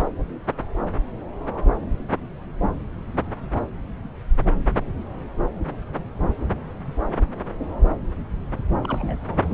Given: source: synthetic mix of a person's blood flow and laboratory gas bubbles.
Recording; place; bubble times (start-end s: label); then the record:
Doppler ultrasound of blood flow; subclavian vein
8.83-9.54 s: bubbles
From the record:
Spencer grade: 1 (occasional bubble signal discernible with the cardiac motion signal, with majority of cardiac periods free of bubbles); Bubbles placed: anywhere in the cardiac cycle